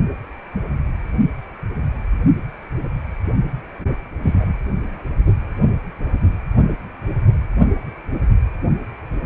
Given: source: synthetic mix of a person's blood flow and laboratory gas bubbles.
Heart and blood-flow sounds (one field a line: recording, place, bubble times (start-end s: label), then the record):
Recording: Doppler ultrasound of blood flow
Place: precordium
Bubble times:
4.23-4.53 s: bubbles
From the record:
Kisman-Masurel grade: 123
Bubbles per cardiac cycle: 1 to 2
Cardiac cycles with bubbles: 10 to 50%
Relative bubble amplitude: loud (0.450 to 0.775)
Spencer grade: 2 (many but less than half of the cardiac periods contain bubble signals, singularly or in groups)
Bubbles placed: only in the low amplitude regions of the cardiac cycle